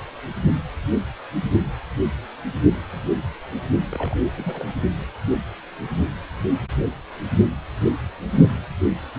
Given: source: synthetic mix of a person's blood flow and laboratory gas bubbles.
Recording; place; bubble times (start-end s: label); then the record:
Doppler ultrasound of blood flow; precordium
3.91-4.17 s: bubbles
4.36-4.67 s: bubbles
From the record:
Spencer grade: 1 (occasional bubble signal discernible with the cardiac motion signal, with majority of cardiac periods free of bubbles); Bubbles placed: only in the low amplitude regions of the cardiac cycle